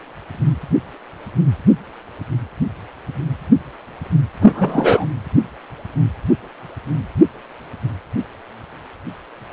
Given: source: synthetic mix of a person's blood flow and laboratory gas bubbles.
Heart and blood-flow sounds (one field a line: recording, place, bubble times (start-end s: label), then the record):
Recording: Doppler ultrasound of blood flow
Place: precordium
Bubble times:
4.41-5.06 s: bubbles
From the record:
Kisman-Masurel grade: 213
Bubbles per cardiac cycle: several, 3 to 8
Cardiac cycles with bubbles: 1 to 10%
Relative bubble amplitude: loud (0.450 to 0.775)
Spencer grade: 1 (occasional bubble signal discernible with the cardiac motion signal, with majority of cardiac periods free of bubbles)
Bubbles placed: anywhere in the cardiac cycle